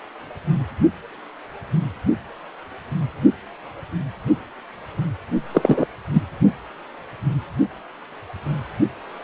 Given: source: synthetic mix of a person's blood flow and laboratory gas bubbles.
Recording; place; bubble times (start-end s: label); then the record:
Doppler ultrasound of blood flow; precordium
5.54-5.85 s: bubbles
6.13-6.21 s: bubbles
From the record:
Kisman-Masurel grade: 213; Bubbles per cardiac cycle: several, 3 to 8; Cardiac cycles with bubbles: 1 to 10%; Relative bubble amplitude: loud (0.450 to 0.775); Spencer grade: 1 (occasional bubble signal discernible with the cardiac motion signal, with majority of cardiac periods free of bubbles); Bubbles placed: only in the low amplitude regions of the cardiac cycle